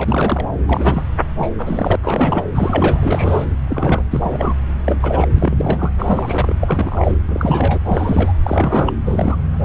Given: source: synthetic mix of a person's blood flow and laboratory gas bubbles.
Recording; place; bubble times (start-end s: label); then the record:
Doppler ultrasound of blood flow; subclavian vein
0.00-0.46 s: bubbles
0.67-1.03 s: bubbles
1.38-1.52 s: bubbles
1.58-1.96 s: bubbles
2.03-2.43 s: bubbles
2.54-3.46 s: bubbles
3.67-4.03 s: bubbles
4.11-4.54 s: bubbles
4.84-5.29 s: bubbles
5.36-5.92 s: bubbles
5.99-6.55 s: bubbles
6.61-7.16 s: bubbles
7.28-7.79 s: bubbles
7.85-8.34 s: bubbles
8.43-8.93 s: bubbles
9.05-9.37 s: bubbles
9.63-9.65 s: bubbles
From the record:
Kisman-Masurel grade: 342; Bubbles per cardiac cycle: rolling drumbeat, 9 or more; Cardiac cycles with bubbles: 100%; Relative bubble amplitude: moderate (0.250 to 0.450); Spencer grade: 3 (all of the cardiac periods contain showers or single bubble signals, but not dominating or overriding the cardiac motion signals); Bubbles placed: anywhere in the cardiac cycle